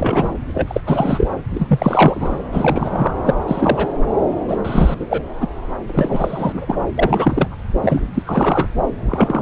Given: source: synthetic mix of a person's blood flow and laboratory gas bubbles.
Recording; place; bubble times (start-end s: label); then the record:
Doppler ultrasound of blood flow; subclavian vein
0.00-0.36 s: bubbles
0.54-0.80 s: bubbles
0.86-1.27 s: bubbles
1.53-2.35 s: bubbles
2.52-3.14 s: bubbles
3.23-3.35 s: bubbles
3.47-3.88 s: bubbles
4.47-4.57 s: bubbles
4.64-4.97 s: bubbles
4.99-5.22 s: bubbles
5.40-5.47 s: bubbles
5.88-6.78 s: bubbles
6.97-7.49 s: bubbles
7.81-8.02 s: bubbles
8.14-8.69 s: bubbles
9.05-9.42 s: bubbles
From the record:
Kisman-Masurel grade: 343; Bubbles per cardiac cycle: rolling drumbeat, 9 or more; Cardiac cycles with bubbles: 100%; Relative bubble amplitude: loud (0.450 to 0.775); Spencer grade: 3 (all of the cardiac periods contain showers or single bubble signals, but not dominating or overriding the cardiac motion signals); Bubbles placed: anywhere in the cardiac cycle